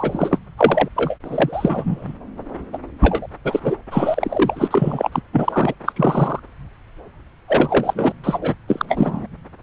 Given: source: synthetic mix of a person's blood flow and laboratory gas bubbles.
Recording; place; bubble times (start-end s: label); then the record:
Doppler ultrasound of blood flow; subclavian vein
0.00-0.39 s: bubbles
0.57-0.89 s: bubbles
0.95-1.17 s: bubbles
1.25-2.14 s: bubbles
2.73-2.78 s: bubbles
3.02-3.27 s: bubbles
3.44-3.76 s: bubbles
3.91-5.08 s: bubbles
5.12-5.21 s: bubbles
5.32-5.74 s: bubbles
5.85-5.92 s: bubbles
5.96-6.40 s: bubbles
7.48-8.12 s: bubbles
8.23-8.38 s: bubbles
8.41-8.54 s: bubbles
8.68-8.86 s: bubbles
8.88-9.27 s: bubbles
From the record:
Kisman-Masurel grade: 343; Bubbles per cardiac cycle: rolling drumbeat, 9 or more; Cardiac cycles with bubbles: 100%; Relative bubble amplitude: loud (0.450 to 0.775); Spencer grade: 3 (all of the cardiac periods contain showers or single bubble signals, but not dominating or overriding the cardiac motion signals); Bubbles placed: anywhere in the cardiac cycle